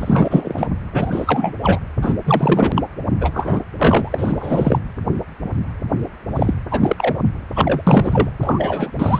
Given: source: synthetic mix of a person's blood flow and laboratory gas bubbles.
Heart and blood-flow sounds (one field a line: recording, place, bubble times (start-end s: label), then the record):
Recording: Doppler ultrasound of blood flow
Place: precordium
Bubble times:
0.00-0.67 s: bubbles
0.93-1.58 s: bubbles
1.62-1.79 s: bubbles
2.02-2.14 s: bubbles
2.24-2.83 s: bubbles
3.21-3.60 s: bubbles
3.79-4.09 s: bubbles
4.12-4.79 s: bubbles
6.36-6.54 s: bubbles
6.71-7.22 s: bubbles
7.55-7.83 s: bubbles
7.86-8.29 s: bubbles
8.41-8.91 s: bubbles
8.98-9.20 s: bubbles
From the record:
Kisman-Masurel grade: 333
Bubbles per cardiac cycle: rolling drumbeat, 9 or more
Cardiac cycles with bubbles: 50 to 99%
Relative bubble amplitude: loud (0.450 to 0.775)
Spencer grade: 3 (all of the cardiac periods contain showers or single bubble signals, but not dominating or overriding the cardiac motion signals)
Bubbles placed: anywhere in the cardiac cycle